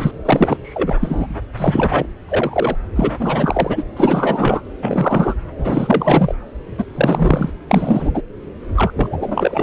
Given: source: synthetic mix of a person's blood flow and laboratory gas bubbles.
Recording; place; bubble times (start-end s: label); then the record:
Doppler ultrasound of blood flow; subclavian vein
0.00-0.11 s: bubbles
0.25-0.57 s: bubbles
0.62-1.26 s: bubbles
1.57-2.06 s: bubbles
2.29-2.77 s: bubbles
2.96-3.12 s: bubbles
3.19-3.83 s: bubbles
3.96-4.62 s: bubbles
4.82-5.34 s: bubbles
5.58-6.35 s: bubbles
6.78-6.85 s: bubbles
6.95-7.52 s: bubbles
7.71-8.22 s: bubbles
8.76-9.07 s: bubbles
9.12-9.63 s: bubbles
From the record:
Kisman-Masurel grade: 343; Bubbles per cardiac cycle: rolling drumbeat, 9 or more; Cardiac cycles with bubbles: 100%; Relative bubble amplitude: loud (0.450 to 0.775); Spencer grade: 3 (all of the cardiac periods contain showers or single bubble signals, but not dominating or overriding the cardiac motion signals); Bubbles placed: anywhere in the cardiac cycle